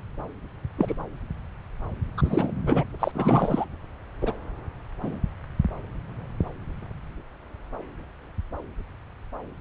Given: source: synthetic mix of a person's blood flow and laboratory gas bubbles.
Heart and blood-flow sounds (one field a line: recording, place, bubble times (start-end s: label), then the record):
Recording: Doppler ultrasound of blood flow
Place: subclavian vein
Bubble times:
0.78-0.94 s: bubbles
2.17-2.51 s: bubbles
2.67-2.84 s: bubbles
3.00-3.11 s: bubbles
3.15-3.65 s: bubbles
4.21-4.32 s: bubbles
5.03-5.20 s: bubbles
From the record:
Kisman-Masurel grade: 222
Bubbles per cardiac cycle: several, 3 to 8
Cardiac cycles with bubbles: 10 to 50%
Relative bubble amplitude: moderate (0.250 to 0.450)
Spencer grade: 2 (many but less than half of the cardiac periods contain bubble signals, singularly or in groups)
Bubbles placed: anywhere in the cardiac cycle